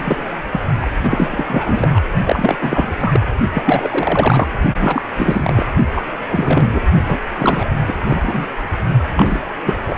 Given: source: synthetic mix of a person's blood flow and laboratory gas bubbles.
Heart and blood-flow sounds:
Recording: Doppler ultrasound of blood flow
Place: precordium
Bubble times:
0.00-0.23 s: bubbles
0.53-0.60 s: bubbles
0.81-0.91 s: bubbles
1.02-1.27 s: bubbles
1.30-2.00 s: bubbles
2.25-2.56 s: bubbles
2.61-3.21 s: bubbles
3.54-4.46 s: bubbles
4.80-5.02 s: bubbles
5.16-5.66 s: bubbles
5.95-6.02 s: bubbles
6.30-6.83 s: bubbles
7.08-7.18 s: bubbles
7.38-7.67 s: bubbles
7.87-7.93 s: bubbles
8.03-8.46 s: bubbles
9.15-9.42 s: bubbles
9.65-9.79 s: bubbles
9.87-9.95 s: bubbles
From the record:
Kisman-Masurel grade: 343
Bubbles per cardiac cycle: rolling drumbeat, 9 or more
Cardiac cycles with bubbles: 100%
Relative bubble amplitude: loud (0.450 to 0.775)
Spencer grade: 3 (all of the cardiac periods contain showers or single bubble signals, but not dominating or overriding the cardiac motion signals)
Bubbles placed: only in the low amplitude regions of the cardiac cycle

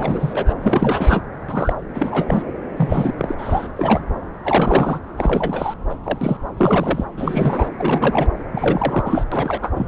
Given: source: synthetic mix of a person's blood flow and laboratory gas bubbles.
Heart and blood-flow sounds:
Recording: Doppler ultrasound of blood flow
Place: subclavian vein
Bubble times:
0.00-0.54 s: bubbles
0.61-1.24 s: bubbles
1.48-1.73 s: bubbles
1.94-2.42 s: bubbles
2.77-3.35 s: bubbles
3.38-3.69 s: bubbles
3.77-4.02 s: bubbles
4.44-5.00 s: bubbles
5.17-5.74 s: bubbles
5.89-5.95 s: bubbles
6.04-6.18 s: bubbles
6.21-6.37 s: bubbles
6.57-7.04 s: bubbles
7.17-7.70 s: bubbles
7.77-8.27 s: bubbles
8.52-9.24 s: bubbles
9.31-9.71 s: bubbles
9.75-9.88 s: bubbles
From the record:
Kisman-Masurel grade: 342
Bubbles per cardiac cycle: rolling drumbeat, 9 or more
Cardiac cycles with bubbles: 100%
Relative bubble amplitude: moderate (0.250 to 0.450)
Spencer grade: 3 (all of the cardiac periods contain showers or single bubble signals, but not dominating or overriding the cardiac motion signals)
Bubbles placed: anywhere in the cardiac cycle

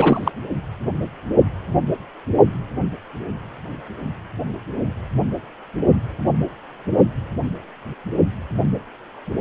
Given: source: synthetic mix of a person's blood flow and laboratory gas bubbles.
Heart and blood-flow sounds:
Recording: Doppler ultrasound of blood flow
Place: precordium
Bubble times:
0.00-0.32 s: bubbles
From the record:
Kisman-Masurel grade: 213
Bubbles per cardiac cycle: several, 3 to 8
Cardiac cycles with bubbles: 1 to 10%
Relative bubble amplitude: loud (0.450 to 0.775)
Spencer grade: 1 (occasional bubble signal discernible with the cardiac motion signal, with majority of cardiac periods free of bubbles)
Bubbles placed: only in the low amplitude regions of the cardiac cycle

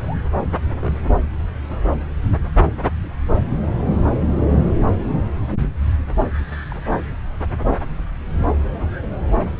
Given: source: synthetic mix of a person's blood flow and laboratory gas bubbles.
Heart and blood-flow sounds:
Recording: Doppler ultrasound of blood flow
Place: subclavian vein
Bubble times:
0.00-0.18 s: bubbles
0.52-0.56 s: bubbles
0.69-0.97 s: bubbles
4.67-4.71 s: bubbles
6.68-6.76 s: bubbles
6.88-7.03 s: bubbles
From the record:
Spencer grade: 2 (many but less than half of the cardiac periods contain bubble signals, singularly or in groups)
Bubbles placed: anywhere in the cardiac cycle

